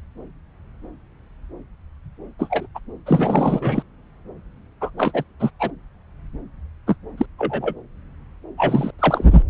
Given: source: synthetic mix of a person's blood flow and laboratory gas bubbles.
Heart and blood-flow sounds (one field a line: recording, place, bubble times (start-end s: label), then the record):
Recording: Doppler ultrasound of blood flow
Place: subclavian vein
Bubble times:
2.39-2.67 s: bubbles
2.75-2.79 s: bubbles
3.06-3.83 s: bubbles
4.81-4.90 s: bubbles
4.98-5.24 s: bubbles
5.40-5.50 s: bubbles
5.60-5.71 s: bubbles
6.87-6.96 s: bubbles
7.17-7.26 s: bubbles
7.38-7.74 s: bubbles
8.58-8.91 s: bubbles
8.98-9.25 s: bubbles
9.30-9.43 s: bubbles
From the record:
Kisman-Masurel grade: 223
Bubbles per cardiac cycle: several, 3 to 8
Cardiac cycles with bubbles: 10 to 50%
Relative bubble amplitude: loud (0.450 to 0.775)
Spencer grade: 2 (many but less than half of the cardiac periods contain bubble signals, singularly or in groups)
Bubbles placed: anywhere in the cardiac cycle